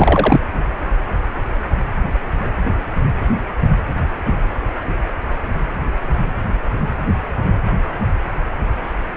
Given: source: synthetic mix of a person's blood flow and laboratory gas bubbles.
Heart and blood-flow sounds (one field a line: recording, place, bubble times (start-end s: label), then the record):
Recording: Doppler ultrasound of blood flow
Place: precordium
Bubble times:
0.00-0.40 s: bubbles
From the record:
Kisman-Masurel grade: 213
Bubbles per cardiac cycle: several, 3 to 8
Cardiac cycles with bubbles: 1 to 10%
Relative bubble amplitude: loud (0.450 to 0.775)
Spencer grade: 1 (occasional bubble signal discernible with the cardiac motion signal, with majority of cardiac periods free of bubbles)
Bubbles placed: anywhere in the cardiac cycle